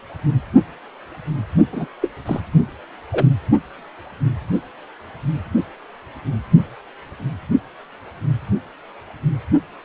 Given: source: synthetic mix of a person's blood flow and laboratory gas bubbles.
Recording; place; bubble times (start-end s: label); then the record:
Doppler ultrasound of blood flow; precordium
1.72-1.87 s: bubbles
2.02-2.10 s: bubbles
2.26-2.40 s: bubbles
3.12-3.27 s: bubbles
From the record:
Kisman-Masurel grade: 212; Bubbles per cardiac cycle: several, 3 to 8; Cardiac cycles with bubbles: 1 to 10%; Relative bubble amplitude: moderate (0.250 to 0.450); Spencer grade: 1 (occasional bubble signal discernible with the cardiac motion signal, with majority of cardiac periods free of bubbles); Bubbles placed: only in the low amplitude regions of the cardiac cycle